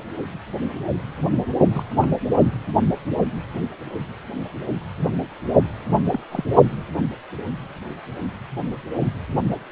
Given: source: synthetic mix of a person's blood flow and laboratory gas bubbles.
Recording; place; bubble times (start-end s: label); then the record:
Doppler ultrasound of blood flow; precordium
1.34-1.46 s: bubbles
1.62-1.83 s: bubbles
2.00-2.20 s: bubbles
2.40-2.51 s: bubbles
6.12-6.20 s: bubbles
6.30-6.45 s: bubbles
From the record:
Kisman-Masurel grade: 221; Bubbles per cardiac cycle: several, 3 to 8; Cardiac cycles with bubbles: 10 to 50%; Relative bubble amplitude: barely perceptible (0.100 to 0.250); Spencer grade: 2 (many but less than half of the cardiac periods contain bubble signals, singularly or in groups); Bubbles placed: anywhere in the cardiac cycle